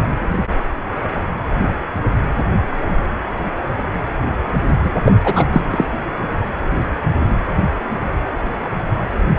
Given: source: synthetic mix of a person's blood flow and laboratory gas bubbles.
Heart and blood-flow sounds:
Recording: Doppler ultrasound of blood flow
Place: precordium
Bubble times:
4.82-4.92 s: bubbles
5.05-5.12 s: bubbles
5.23-5.46 s: bubbles
5.52-5.61 s: bubbles
5.71-5.85 s: bubbles
From the record:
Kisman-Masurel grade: 213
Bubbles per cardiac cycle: several, 3 to 8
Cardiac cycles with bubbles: 1 to 10%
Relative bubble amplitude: loud (0.450 to 0.775)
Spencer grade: 1 (occasional bubble signal discernible with the cardiac motion signal, with majority of cardiac periods free of bubbles)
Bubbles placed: anywhere in the cardiac cycle

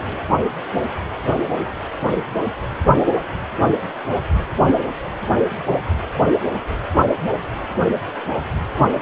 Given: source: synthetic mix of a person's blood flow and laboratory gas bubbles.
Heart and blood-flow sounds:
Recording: Doppler ultrasound of blood flow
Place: precordium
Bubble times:
no bubbles
From the record:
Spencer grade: 0 (complete lack of bubble signals)

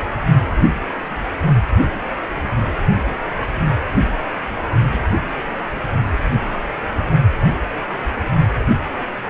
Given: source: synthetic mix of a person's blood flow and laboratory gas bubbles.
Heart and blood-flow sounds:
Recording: Doppler ultrasound of blood flow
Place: precordium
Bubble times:
4.92-5.00 s: bubbles
5.75-5.80 s: bubbles
From the record:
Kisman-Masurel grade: 111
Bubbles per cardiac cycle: 1 to 2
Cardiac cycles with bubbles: 1 to 10%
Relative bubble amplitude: barely perceptible (0.100 to 0.250)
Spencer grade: 1 (occasional bubble signal discernible with the cardiac motion signal, with majority of cardiac periods free of bubbles)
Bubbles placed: only in the low amplitude regions of the cardiac cycle

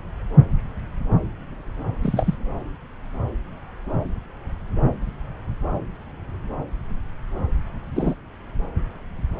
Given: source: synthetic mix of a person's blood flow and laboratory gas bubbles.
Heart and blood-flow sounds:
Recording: Doppler ultrasound of blood flow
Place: subclavian vein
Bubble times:
2.02-2.37 s: bubbles
7.96-8.15 s: bubbles
From the record:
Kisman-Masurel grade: 123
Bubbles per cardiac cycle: 1 to 2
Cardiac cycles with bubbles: 10 to 50%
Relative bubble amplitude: loud (0.450 to 0.775)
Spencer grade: 2 (many but less than half of the cardiac periods contain bubble signals, singularly or in groups)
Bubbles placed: anywhere in the cardiac cycle

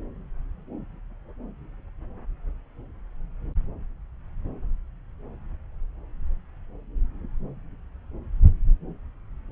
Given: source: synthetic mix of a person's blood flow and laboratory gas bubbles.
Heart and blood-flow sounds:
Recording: Doppler ultrasound of blood flow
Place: subclavian vein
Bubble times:
no bubbles
From the record:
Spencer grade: 0 (complete lack of bubble signals)

